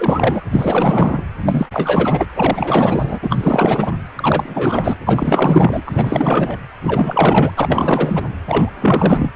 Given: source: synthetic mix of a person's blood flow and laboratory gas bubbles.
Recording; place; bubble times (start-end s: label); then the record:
Doppler ultrasound of blood flow; precordium
0.00-0.41 s: bubbles
0.52-1.22 s: bubbles
1.46-1.69 s: bubbles
1.72-2.26 s: bubbles
2.36-3.20 s: bubbles
3.23-3.92 s: bubbles
4.16-4.96 s: bubbles
5.06-5.83 s: bubbles
5.86-6.58 s: bubbles
6.82-7.52 s: bubbles
7.57-8.24 s: bubbles
8.46-8.73 s: bubbles
8.80-9.31 s: bubbles
From the record:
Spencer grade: 4 (maximum detectable bubble signal sounding continuously throughout systole and diastole of every cardiac period, and overriding the amplitude of the normal cardiac signals); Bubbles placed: anywhere in the cardiac cycle